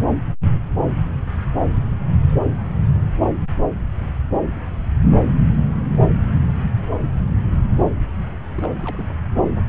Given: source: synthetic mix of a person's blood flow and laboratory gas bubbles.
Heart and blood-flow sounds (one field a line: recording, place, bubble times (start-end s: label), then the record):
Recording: Doppler ultrasound of blood flow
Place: subclavian vein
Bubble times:
8.56-9.09 s: bubbles
From the record:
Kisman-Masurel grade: 211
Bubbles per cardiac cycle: several, 3 to 8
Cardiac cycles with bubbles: 1 to 10%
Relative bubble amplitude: barely perceptible (0.100 to 0.250)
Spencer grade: 1 (occasional bubble signal discernible with the cardiac motion signal, with majority of cardiac periods free of bubbles)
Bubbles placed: anywhere in the cardiac cycle